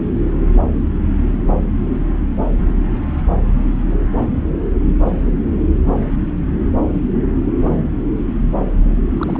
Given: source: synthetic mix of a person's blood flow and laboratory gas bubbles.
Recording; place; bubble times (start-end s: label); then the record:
Doppler ultrasound of blood flow; subclavian vein
9.18-9.40 s: bubbles
From the record:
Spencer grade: 1 (occasional bubble signal discernible with the cardiac motion signal, with majority of cardiac periods free of bubbles); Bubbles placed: anywhere in the cardiac cycle